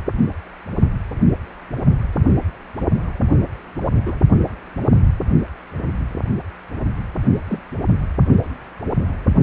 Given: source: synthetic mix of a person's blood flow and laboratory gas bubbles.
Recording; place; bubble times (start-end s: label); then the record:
Doppler ultrasound of blood flow; precordium
4.06-4.21 s: bubbles
7.48-7.60 s: bubbles
From the record:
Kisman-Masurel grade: 122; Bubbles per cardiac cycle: 1 to 2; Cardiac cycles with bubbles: 10 to 50%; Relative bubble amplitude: moderate (0.250 to 0.450); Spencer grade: 2 (many but less than half of the cardiac periods contain bubble signals, singularly or in groups); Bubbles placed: only in the low amplitude regions of the cardiac cycle